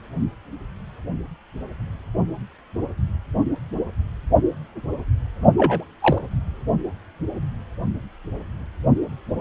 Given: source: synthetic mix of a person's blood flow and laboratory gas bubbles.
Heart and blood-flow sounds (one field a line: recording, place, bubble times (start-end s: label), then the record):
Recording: Doppler ultrasound of blood flow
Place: precordium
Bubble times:
5.58-5.84 s: bubbles
6.00-6.19 s: bubbles
From the record:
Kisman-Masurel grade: 112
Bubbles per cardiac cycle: 1 to 2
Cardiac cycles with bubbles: 1 to 10%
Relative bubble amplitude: moderate (0.250 to 0.450)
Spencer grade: 1 (occasional bubble signal discernible with the cardiac motion signal, with majority of cardiac periods free of bubbles)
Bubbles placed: only in the low amplitude regions of the cardiac cycle